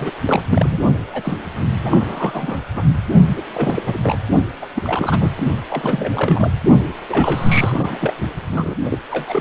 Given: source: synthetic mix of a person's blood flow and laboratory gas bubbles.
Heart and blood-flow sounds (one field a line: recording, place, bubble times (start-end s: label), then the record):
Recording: Doppler ultrasound of blood flow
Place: precordium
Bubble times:
0.00-0.11 s: bubbles
0.27-0.44 s: bubbles
0.49-0.79 s: bubbles
1.13-1.34 s: bubbles
1.83-2.63 s: bubbles
2.74-2.82 s: bubbles
3.37-3.42 s: bubbles
3.54-3.83 s: bubbles
3.86-3.99 s: bubbles
4.03-4.19 s: bubbles
4.62-4.66 s: bubbles
4.75-5.29 s: bubbles
5.70-6.50 s: bubbles
7.08-8.13 s: bubbles
8.51-8.75 s: bubbles
8.84-8.99 s: bubbles
9.09-9.41 s: bubbles
From the record:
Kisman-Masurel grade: 332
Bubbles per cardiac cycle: rolling drumbeat, 9 or more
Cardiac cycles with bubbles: 50 to 99%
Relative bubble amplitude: moderate (0.250 to 0.450)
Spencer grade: 3 (all of the cardiac periods contain showers or single bubble signals, but not dominating or overriding the cardiac motion signals)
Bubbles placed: only in the low amplitude regions of the cardiac cycle